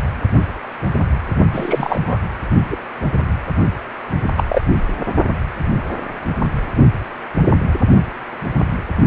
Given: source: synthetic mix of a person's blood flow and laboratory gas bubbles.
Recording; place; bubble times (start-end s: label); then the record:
Doppler ultrasound of blood flow; precordium
1.52-2.21 s: bubbles
2.71-2.77 s: bubbles
4.37-4.43 s: bubbles
4.49-4.61 s: bubbles
From the record:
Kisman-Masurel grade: 123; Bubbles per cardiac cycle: 1 to 2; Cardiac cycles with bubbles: 10 to 50%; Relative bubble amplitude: loud (0.450 to 0.775); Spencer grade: 2 (many but less than half of the cardiac periods contain bubble signals, singularly or in groups); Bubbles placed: only in the low amplitude regions of the cardiac cycle